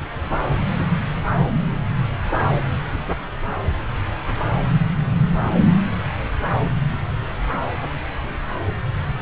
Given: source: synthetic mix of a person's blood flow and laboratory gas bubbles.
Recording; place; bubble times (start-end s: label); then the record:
Doppler ultrasound of blood flow; subclavian vein
no bubbles
From the record:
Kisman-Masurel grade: 000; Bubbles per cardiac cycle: 0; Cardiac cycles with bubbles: 0%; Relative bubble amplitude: no bubbles discernible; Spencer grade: 0 (complete lack of bubble signals)